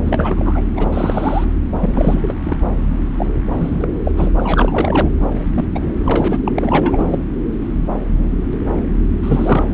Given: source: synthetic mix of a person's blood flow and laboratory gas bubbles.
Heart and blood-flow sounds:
Doppler ultrasound of blood flow; subclavian vein
0.04-0.62 s: bubbles
0.75-0.88 s: bubbles
0.93-1.44 s: bubbles
1.79-2.35 s: bubbles
2.43-2.67 s: bubbles
3.17-3.26 s: bubbles
3.57-3.88 s: bubbles
4.04-4.12 s: bubbles
4.17-4.31 s: bubbles
4.37-5.09 s: bubbles
5.55-5.65 s: bubbles
5.75-5.94 s: bubbles
6.03-6.39 s: bubbles
6.45-6.52 s: bubbles
6.55-7.08 s: bubbles
7.10-7.19 s: bubbles
9.23-9.64 s: bubbles
From the record:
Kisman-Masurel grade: 333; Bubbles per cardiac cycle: rolling drumbeat, 9 or more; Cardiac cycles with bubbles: 50 to 99%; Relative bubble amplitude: loud (0.450 to 0.775); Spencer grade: 3 (all of the cardiac periods contain showers or single bubble signals, but not dominating or overriding the cardiac motion signals); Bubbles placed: anywhere in the cardiac cycle

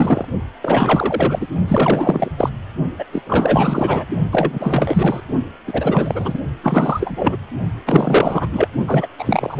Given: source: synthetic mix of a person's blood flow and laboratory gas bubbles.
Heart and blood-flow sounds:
Doppler ultrasound of blood flow; precordium
0.00-0.25 s: bubbles
0.62-1.47 s: bubbles
1.68-2.29 s: bubbles
2.38-2.49 s: bubbles
2.98-3.04 s: bubbles
3.12-3.21 s: bubbles
3.26-4.04 s: bubbles
4.32-5.21 s: bubbles
5.67-6.39 s: bubbles
6.62-7.37 s: bubbles
7.86-8.48 s: bubbles
8.52-8.68 s: bubbles
8.87-9.07 s: bubbles
9.18-9.59 s: bubbles
From the record:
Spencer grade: 4 (maximum detectable bubble signal sounding continuously throughout systole and diastole of every cardiac period, and overriding the amplitude of the normal cardiac signals); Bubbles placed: only in the low amplitude regions of the cardiac cycle

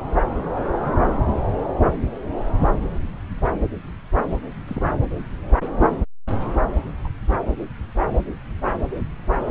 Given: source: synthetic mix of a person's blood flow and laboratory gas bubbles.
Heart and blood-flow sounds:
Doppler ultrasound of blood flow; subclavian vein
4.67-4.86 s: bubbles
7.04-7.09 s: bubbles
From the record:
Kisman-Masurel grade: 121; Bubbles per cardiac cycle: 1 to 2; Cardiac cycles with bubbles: 10 to 50%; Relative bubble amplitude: barely perceptible (0.100 to 0.250); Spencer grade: 2 (many but less than half of the cardiac periods contain bubble signals, singularly or in groups); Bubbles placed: anywhere in the cardiac cycle

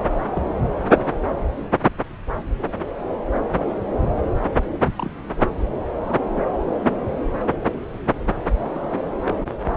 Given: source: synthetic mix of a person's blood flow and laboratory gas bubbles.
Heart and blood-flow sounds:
Doppler ultrasound of blood flow; subclavian vein
0.35-0.43 s: bubbles
0.94-1.02 s: bubbles
1.15-1.19 s: bubbles
4.66-4.70 s: bubbles
4.96-5.11 s: bubbles
6.08-6.21 s: bubbles
6.83-6.97 s: bubbles
8.59-8.92 s: bubbles
9.22-9.34 s: bubbles
From the record:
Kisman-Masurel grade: 121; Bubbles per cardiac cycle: 1 to 2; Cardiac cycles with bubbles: 10 to 50%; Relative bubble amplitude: barely perceptible (0.100 to 0.250); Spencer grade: 2 (many but less than half of the cardiac periods contain bubble signals, singularly or in groups); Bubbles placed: anywhere in the cardiac cycle

